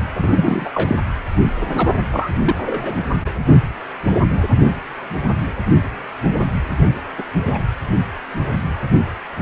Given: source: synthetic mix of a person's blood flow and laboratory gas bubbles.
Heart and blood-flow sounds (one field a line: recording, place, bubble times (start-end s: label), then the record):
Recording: Doppler ultrasound of blood flow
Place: precordium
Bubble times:
0.15-0.70 s: bubbles
0.74-0.95 s: bubbles
1.60-1.89 s: bubbles
2.12-2.29 s: bubbles
2.46-2.55 s: bubbles
2.66-2.97 s: bubbles
7.18-7.23 s: bubbles
7.45-7.66 s: bubbles
From the record:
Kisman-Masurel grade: 222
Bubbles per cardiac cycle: several, 3 to 8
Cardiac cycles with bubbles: 10 to 50%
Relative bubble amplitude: moderate (0.250 to 0.450)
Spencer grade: 2 (many but less than half of the cardiac periods contain bubble signals, singularly or in groups)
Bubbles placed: anywhere in the cardiac cycle